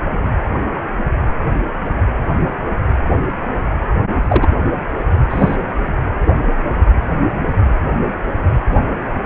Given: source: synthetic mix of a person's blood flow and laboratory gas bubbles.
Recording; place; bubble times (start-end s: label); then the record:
Doppler ultrasound of blood flow; precordium
4.22-4.51 s: bubbles
5.29-5.55 s: bubbles
From the record:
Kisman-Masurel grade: 212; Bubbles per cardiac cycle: several, 3 to 8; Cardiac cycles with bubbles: 1 to 10%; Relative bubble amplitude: moderate (0.250 to 0.450); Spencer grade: 1 (occasional bubble signal discernible with the cardiac motion signal, with majority of cardiac periods free of bubbles); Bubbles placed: anywhere in the cardiac cycle